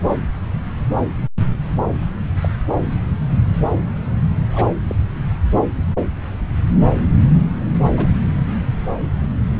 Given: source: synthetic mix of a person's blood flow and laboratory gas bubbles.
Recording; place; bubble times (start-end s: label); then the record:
Doppler ultrasound of blood flow; subclavian vein
2.42-2.49 s: bubbles
4.54-4.66 s: bubbles
4.88-4.96 s: bubbles
7.97-8.09 s: bubbles
From the record:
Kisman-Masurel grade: 121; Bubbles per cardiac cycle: 1 to 2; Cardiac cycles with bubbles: 10 to 50%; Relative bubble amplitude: barely perceptible (0.100 to 0.250); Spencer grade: 2 (many but less than half of the cardiac periods contain bubble signals, singularly or in groups); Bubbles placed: anywhere in the cardiac cycle